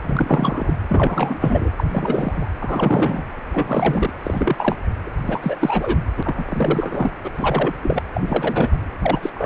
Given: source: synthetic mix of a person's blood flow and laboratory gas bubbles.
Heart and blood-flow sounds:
Doppler ultrasound of blood flow; precordium
0.02-0.75 s: bubbles
0.88-1.71 s: bubbles
1.77-1.85 s: bubbles
1.92-2.49 s: bubbles
2.59-3.23 s: bubbles
3.52-4.13 s: bubbles
4.23-4.76 s: bubbles
5.06-5.12 s: bubbles
5.25-5.56 s: bubbles
5.59-5.99 s: bubbles
6.17-7.13 s: bubbles
7.24-7.31 s: bubbles
7.38-7.74 s: bubbles
7.82-8.03 s: bubbles
8.13-8.79 s: bubbles
9.02-9.30 s: bubbles
9.35-9.46 s: bubbles
From the record:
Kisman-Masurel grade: 343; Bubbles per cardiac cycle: rolling drumbeat, 9 or more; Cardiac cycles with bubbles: 100%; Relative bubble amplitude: loud (0.450 to 0.775); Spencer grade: 3 (all of the cardiac periods contain showers or single bubble signals, but not dominating or overriding the cardiac motion signals); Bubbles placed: anywhere in the cardiac cycle

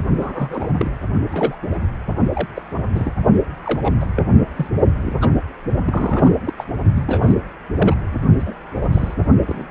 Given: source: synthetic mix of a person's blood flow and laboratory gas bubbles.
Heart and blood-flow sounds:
Doppler ultrasound of blood flow; precordium
0.20-0.68 s: bubbles
0.78-0.91 s: bubbles
1.29-1.55 s: bubbles
2.34-2.48 s: bubbles
2.55-2.62 s: bubbles
2.94-3.13 s: bubbles
3.63-3.95 s: bubbles
4.00-4.06 s: bubbles
4.16-4.22 s: bubbles
4.56-4.67 s: bubbles
5.02-5.18 s: bubbles
5.21-5.30 s: bubbles
5.87-6.33 s: bubbles
6.44-6.53 s: bubbles
6.58-6.64 s: bubbles
6.95-7.02 s: bubbles
7.07-7.34 s: bubbles
7.78-7.97 s: bubbles
8.39-8.54 s: bubbles
8.74-8.90 s: bubbles
8.93-9.14 s: bubbles
9.47-9.67 s: bubbles
9.69-9.71 s: bubbles
From the record:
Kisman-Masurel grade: 232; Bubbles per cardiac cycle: several, 3 to 8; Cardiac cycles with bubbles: 50 to 99%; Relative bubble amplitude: moderate (0.250 to 0.450); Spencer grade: 3 (all of the cardiac periods contain showers or single bubble signals, but not dominating or overriding the cardiac motion signals); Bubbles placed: only in the low amplitude regions of the cardiac cycle

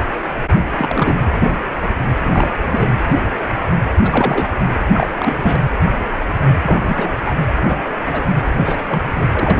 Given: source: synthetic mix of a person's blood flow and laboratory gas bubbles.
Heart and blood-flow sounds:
Doppler ultrasound of blood flow; precordium
0.76-1.30 s: bubbles
1.39-1.57 s: bubbles
2.25-2.49 s: bubbles
2.65-2.92 s: bubbles
4.04-4.48 s: bubbles
4.92-5.08 s: bubbles
5.18-5.61 s: bubbles
6.62-7.36 s: bubbles
7.58-7.84 s: bubbles
8.07-8.23 s: bubbles
8.65-8.83 s: bubbles
8.88-9.02 s: bubbles
9.06-9.27 s: bubbles
9.33-9.60 s: bubbles
From the record:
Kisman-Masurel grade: 232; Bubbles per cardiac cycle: several, 3 to 8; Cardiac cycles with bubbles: 50 to 99%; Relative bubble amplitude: moderate (0.250 to 0.450); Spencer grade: 3 (all of the cardiac periods contain showers or single bubble signals, but not dominating or overriding the cardiac motion signals); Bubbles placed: anywhere in the cardiac cycle

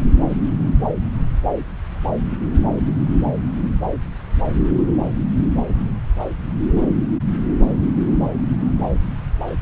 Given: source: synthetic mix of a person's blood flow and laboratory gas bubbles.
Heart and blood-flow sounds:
Doppler ultrasound of blood flow; subclavian vein
no bubbles
From the record:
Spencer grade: 0 (complete lack of bubble signals)

